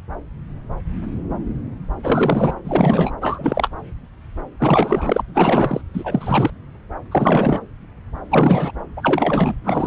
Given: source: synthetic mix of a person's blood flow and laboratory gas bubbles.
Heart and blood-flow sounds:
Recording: Doppler ultrasound of blood flow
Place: subclavian vein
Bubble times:
2.03-2.54 s: bubbles
2.64-3.11 s: bubbles
3.22-3.70 s: bubbles
4.59-5.21 s: bubbles
5.34-5.81 s: bubbles
5.93-6.50 s: bubbles
7.11-7.60 s: bubbles
8.30-8.71 s: bubbles
8.96-9.54 s: bubbles
9.64-9.87 s: bubbles
From the record:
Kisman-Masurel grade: 333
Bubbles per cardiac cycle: rolling drumbeat, 9 or more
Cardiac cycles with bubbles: 50 to 99%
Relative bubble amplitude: loud (0.450 to 0.775)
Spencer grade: 3 (all of the cardiac periods contain showers or single bubble signals, but not dominating or overriding the cardiac motion signals)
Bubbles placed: anywhere in the cardiac cycle

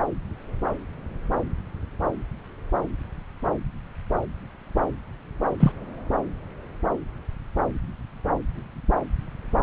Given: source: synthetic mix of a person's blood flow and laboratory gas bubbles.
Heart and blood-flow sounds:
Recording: Doppler ultrasound of blood flow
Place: subclavian vein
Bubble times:
5.60-5.72 s: bubbles
From the record:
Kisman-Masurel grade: 113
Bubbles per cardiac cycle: 1 to 2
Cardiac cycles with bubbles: 1 to 10%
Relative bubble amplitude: loud (0.450 to 0.775)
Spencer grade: 1 (occasional bubble signal discernible with the cardiac motion signal, with majority of cardiac periods free of bubbles)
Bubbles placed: anywhere in the cardiac cycle

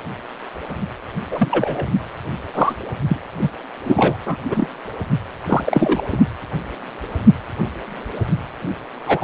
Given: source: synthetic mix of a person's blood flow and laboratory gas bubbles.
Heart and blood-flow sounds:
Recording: Doppler ultrasound of blood flow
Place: precordium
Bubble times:
1.31-1.49 s: bubbles
1.51-1.88 s: bubbles
2.54-2.75 s: bubbles
3.08-3.17 s: bubbles
3.42-3.49 s: bubbles
3.84-4.18 s: bubbles
4.25-4.37 s: bubbles
4.48-4.68 s: bubbles
5.48-6.02 s: bubbles
6.12-6.17 s: bubbles
9.06-9.24 s: bubbles
From the record:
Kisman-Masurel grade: 233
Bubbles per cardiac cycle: several, 3 to 8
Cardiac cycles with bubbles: 50 to 99%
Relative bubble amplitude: loud (0.450 to 0.775)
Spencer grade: 3 (all of the cardiac periods contain showers or single bubble signals, but not dominating or overriding the cardiac motion signals)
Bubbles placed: anywhere in the cardiac cycle

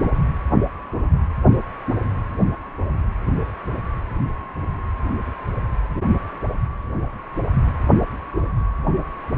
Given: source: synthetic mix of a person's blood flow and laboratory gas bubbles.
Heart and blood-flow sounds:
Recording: Doppler ultrasound of blood flow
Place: precordium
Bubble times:
0.03-0.11 s: bubbles
From the record:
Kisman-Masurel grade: 112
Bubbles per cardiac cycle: 1 to 2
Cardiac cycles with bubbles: 1 to 10%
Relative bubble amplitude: moderate (0.250 to 0.450)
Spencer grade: 1 (occasional bubble signal discernible with the cardiac motion signal, with majority of cardiac periods free of bubbles)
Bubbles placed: anywhere in the cardiac cycle

